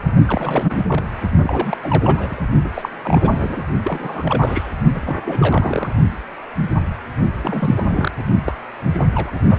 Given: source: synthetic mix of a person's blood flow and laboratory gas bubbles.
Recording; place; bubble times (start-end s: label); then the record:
Doppler ultrasound of blood flow; precordium
0.27-0.85 s: bubbles
0.89-1.04 s: bubbles
1.42-1.78 s: bubbles
1.82-2.41 s: bubbles
2.63-2.70 s: bubbles
2.74-2.90 s: bubbles
3.03-3.63 s: bubbles
3.84-4.73 s: bubbles
4.94-5.16 s: bubbles
5.22-5.94 s: bubbles
7.38-7.87 s: bubbles
7.89-8.12 s: bubbles
8.46-8.52 s: bubbles
8.93-9.05 s: bubbles
9.14-9.41 s: bubbles
9.46-9.59 s: bubbles
From the record:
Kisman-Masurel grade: 332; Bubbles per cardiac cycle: rolling drumbeat, 9 or more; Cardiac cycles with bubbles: 50 to 99%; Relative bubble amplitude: moderate (0.250 to 0.450); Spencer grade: 3 (all of the cardiac periods contain showers or single bubble signals, but not dominating or overriding the cardiac motion signals); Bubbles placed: only in the low amplitude regions of the cardiac cycle